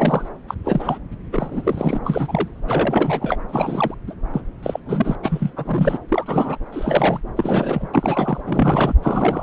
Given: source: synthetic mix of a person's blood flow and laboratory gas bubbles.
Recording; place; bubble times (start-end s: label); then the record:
Doppler ultrasound of blood flow; subclavian vein
0.00-0.29 s: bubbles
0.48-0.55 s: bubbles
0.65-0.99 s: bubbles
1.32-1.98 s: bubbles
2.04-2.48 s: bubbles
2.67-3.38 s: bubbles
3.48-3.94 s: bubbles
4.07-4.14 s: bubbles
4.33-4.41 s: bubbles
4.62-4.80 s: bubbles
4.85-5.15 s: bubbles
5.22-5.50 s: bubbles
5.56-5.99 s: bubbles
6.08-6.57 s: bubbles
6.72-7.21 s: bubbles
7.36-7.88 s: bubbles
7.93-8.40 s: bubbles
8.46-8.95 s: bubbles
9.02-9.43 s: bubbles
From the record:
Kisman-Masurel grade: 342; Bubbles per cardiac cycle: rolling drumbeat, 9 or more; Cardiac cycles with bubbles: 100%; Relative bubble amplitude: moderate (0.250 to 0.450); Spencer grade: 3 (all of the cardiac periods contain showers or single bubble signals, but not dominating or overriding the cardiac motion signals); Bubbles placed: anywhere in the cardiac cycle